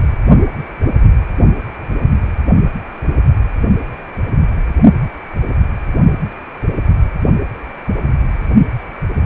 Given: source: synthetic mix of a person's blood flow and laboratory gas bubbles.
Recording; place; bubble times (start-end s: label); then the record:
Doppler ultrasound of blood flow; precordium
no bubbles
From the record:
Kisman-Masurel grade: 000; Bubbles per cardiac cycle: 0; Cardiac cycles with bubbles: 0%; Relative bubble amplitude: no bubbles discernible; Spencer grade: 0 (complete lack of bubble signals)